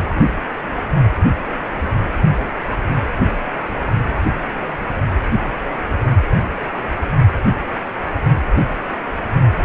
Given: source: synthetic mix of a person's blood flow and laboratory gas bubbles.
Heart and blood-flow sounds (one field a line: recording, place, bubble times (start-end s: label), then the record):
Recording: Doppler ultrasound of blood flow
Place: precordium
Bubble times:
no bubbles
From the record:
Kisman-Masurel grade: 000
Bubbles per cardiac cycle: 0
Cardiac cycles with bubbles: 0%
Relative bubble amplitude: no bubbles discernible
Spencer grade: 0 (complete lack of bubble signals)